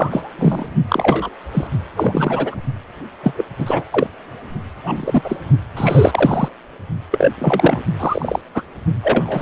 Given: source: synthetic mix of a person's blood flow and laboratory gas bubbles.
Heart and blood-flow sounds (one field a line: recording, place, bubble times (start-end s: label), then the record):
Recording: Doppler ultrasound of blood flow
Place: precordium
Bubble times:
0.00-0.30 s: bubbles
0.39-0.66 s: bubbles
0.88-1.29 s: bubbles
1.52-1.67 s: bubbles
1.96-2.55 s: bubbles
3.23-3.33 s: bubbles
3.35-3.45 s: bubbles
3.58-3.83 s: bubbles
3.91-4.07 s: bubbles
4.84-5.39 s: bubbles
5.77-6.49 s: bubbles
7.12-7.32 s: bubbles
7.38-7.84 s: bubbles
8.00-8.42 s: bubbles
8.54-8.62 s: bubbles
9.03-9.42 s: bubbles
From the record:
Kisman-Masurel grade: 243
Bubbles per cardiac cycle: several, 3 to 8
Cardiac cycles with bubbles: 100%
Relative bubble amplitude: loud (0.450 to 0.775)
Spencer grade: 3 (all of the cardiac periods contain showers or single bubble signals, but not dominating or overriding the cardiac motion signals)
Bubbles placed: only in the low amplitude regions of the cardiac cycle